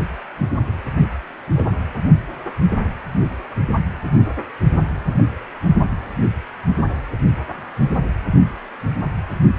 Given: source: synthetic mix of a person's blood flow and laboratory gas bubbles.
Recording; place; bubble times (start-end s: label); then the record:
Doppler ultrasound of blood flow; precordium
0.96-1.08 s: bubbles
1.54-1.65 s: bubbles
From the record:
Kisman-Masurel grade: 111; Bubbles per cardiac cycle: 1 to 2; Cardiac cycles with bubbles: 1 to 10%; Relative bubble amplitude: barely perceptible (0.100 to 0.250); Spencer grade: 1 (occasional bubble signal discernible with the cardiac motion signal, with majority of cardiac periods free of bubbles); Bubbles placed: anywhere in the cardiac cycle